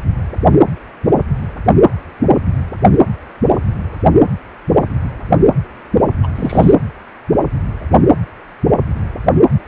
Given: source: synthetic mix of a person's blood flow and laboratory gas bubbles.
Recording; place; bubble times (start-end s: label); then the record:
Doppler ultrasound of blood flow; precordium
6.22-6.27 s: bubbles
6.35-6.74 s: bubbles
From the record:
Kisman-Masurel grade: 212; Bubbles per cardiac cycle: several, 3 to 8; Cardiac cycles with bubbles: 1 to 10%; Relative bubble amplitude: moderate (0.250 to 0.450); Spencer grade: 1 (occasional bubble signal discernible with the cardiac motion signal, with majority of cardiac periods free of bubbles); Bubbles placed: anywhere in the cardiac cycle